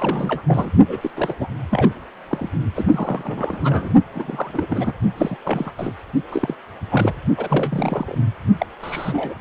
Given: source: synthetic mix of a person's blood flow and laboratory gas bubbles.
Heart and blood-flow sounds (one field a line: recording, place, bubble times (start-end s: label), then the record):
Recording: Doppler ultrasound of blood flow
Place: precordium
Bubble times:
0.00-0.42 s: bubbles
0.47-0.70 s: bubbles
0.88-1.10 s: bubbles
1.15-1.34 s: bubbles
1.39-1.48 s: bubbles
1.70-1.92 s: bubbles
2.29-2.49 s: bubbles
2.75-3.94 s: bubbles
4.15-4.92 s: bubbles
5.17-5.36 s: bubbles
5.44-5.71 s: bubbles
5.78-5.93 s: bubbles
6.32-6.55 s: bubbles
6.91-7.13 s: bubbles
7.37-8.18 s: bubbles
8.59-8.66 s: bubbles
8.82-9.37 s: bubbles
From the record:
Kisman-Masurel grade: 332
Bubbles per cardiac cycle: rolling drumbeat, 9 or more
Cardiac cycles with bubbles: 50 to 99%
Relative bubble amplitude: moderate (0.250 to 0.450)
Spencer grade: 3 (all of the cardiac periods contain showers or single bubble signals, but not dominating or overriding the cardiac motion signals)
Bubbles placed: only in the low amplitude regions of the cardiac cycle